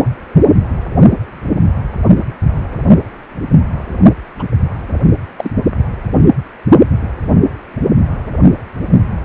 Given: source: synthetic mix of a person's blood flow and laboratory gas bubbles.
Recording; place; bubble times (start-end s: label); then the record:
Doppler ultrasound of blood flow; precordium
4.38-4.44 s: bubbles
5.38-5.54 s: bubbles
From the record:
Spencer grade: 2 (many but less than half of the cardiac periods contain bubble signals, singularly or in groups); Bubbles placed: only in the low amplitude regions of the cardiac cycle